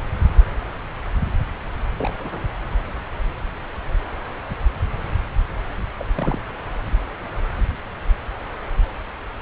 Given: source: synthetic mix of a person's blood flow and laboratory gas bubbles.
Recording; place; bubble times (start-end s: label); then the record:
Doppler ultrasound of blood flow; subclavian vein
1.97-2.16 s: bubbles
2.20-2.47 s: bubbles
5.99-6.05 s: bubbles
6.15-6.40 s: bubbles
From the record:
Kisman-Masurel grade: 221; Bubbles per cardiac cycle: several, 3 to 8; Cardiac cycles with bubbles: 10 to 50%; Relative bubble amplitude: barely perceptible (0.100 to 0.250); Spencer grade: 2 (many but less than half of the cardiac periods contain bubble signals, singularly or in groups); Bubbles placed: anywhere in the cardiac cycle